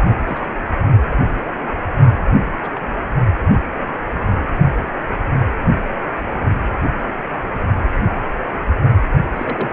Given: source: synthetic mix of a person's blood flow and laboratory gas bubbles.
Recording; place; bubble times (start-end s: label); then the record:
Doppler ultrasound of blood flow; precordium
0.19-0.41 s: bubbles
1.10-1.17 s: bubbles
1.21-1.51 s: bubbles
2.25-2.35 s: bubbles
2.62-2.80 s: bubbles
9.35-9.73 s: bubbles
From the record:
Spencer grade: 2 (many but less than half of the cardiac periods contain bubble signals, singularly or in groups); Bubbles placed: only in the low amplitude regions of the cardiac cycle